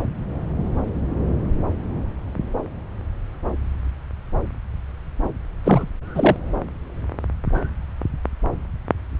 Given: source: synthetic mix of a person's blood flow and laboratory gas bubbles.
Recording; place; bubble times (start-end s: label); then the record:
Doppler ultrasound of blood flow; subclavian vein
5.64-5.89 s: bubbles
6.14-6.36 s: bubbles
From the record:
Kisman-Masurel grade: 213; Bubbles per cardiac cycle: several, 3 to 8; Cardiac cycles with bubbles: 1 to 10%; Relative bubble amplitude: loud (0.450 to 0.775); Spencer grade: 1 (occasional bubble signal discernible with the cardiac motion signal, with majority of cardiac periods free of bubbles); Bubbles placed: anywhere in the cardiac cycle